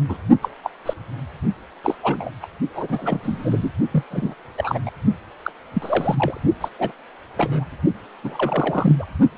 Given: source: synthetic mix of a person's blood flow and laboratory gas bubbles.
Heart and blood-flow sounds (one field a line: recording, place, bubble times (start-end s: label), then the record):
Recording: Doppler ultrasound of blood flow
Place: precordium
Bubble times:
0.09-0.18 s: bubbles
0.42-0.48 s: bubbles
0.64-0.69 s: bubbles
0.85-0.94 s: bubbles
1.84-1.95 s: bubbles
2.02-2.30 s: bubbles
2.42-2.46 s: bubbles
2.74-3.70 s: bubbles
3.91-4.04 s: bubbles
4.11-4.35 s: bubbles
4.57-4.79 s: bubbles
4.86-4.90 s: bubbles
5.45-5.52 s: bubbles
5.75-6.42 s: bubbles
6.61-6.69 s: bubbles
6.79-6.92 s: bubbles
7.37-7.65 s: bubbles
8.23-8.96 s: bubbles
8.98-9.04 s: bubbles
From the record:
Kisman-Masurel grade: 242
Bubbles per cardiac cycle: several, 3 to 8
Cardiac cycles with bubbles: 100%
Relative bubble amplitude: moderate (0.250 to 0.450)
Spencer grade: 3 (all of the cardiac periods contain showers or single bubble signals, but not dominating or overriding the cardiac motion signals)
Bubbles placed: only in the low amplitude regions of the cardiac cycle